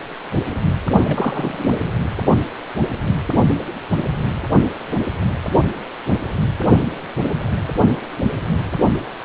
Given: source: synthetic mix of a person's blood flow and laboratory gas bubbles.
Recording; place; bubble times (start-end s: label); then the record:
Doppler ultrasound of blood flow; precordium
1.06-1.90 s: bubbles
From the record:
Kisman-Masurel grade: 222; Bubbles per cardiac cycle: several, 3 to 8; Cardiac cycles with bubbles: 10 to 50%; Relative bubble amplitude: moderate (0.250 to 0.450); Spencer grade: 2 (many but less than half of the cardiac periods contain bubble signals, singularly or in groups); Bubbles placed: only in the low amplitude regions of the cardiac cycle